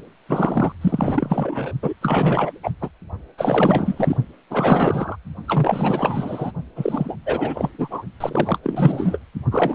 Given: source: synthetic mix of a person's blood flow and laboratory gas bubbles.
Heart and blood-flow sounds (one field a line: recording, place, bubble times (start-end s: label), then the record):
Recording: Doppler ultrasound of blood flow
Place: precordium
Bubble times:
0.27-0.72 s: bubbles
0.81-1.73 s: bubbles
1.82-1.93 s: bubbles
2.01-2.52 s: bubbles
2.63-2.71 s: bubbles
2.81-2.90 s: bubbles
3.38-4.17 s: bubbles
4.50-5.16 s: bubbles
5.47-6.51 s: bubbles
6.75-7.16 s: bubbles
7.25-7.69 s: bubbles
7.78-8.03 s: bubbles
8.20-8.58 s: bubbles
8.63-9.18 s: bubbles
9.51-9.75 s: bubbles
From the record:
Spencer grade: 4 (maximum detectable bubble signal sounding continuously throughout systole and diastole of every cardiac period, and overriding the amplitude of the normal cardiac signals)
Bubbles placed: only in the low amplitude regions of the cardiac cycle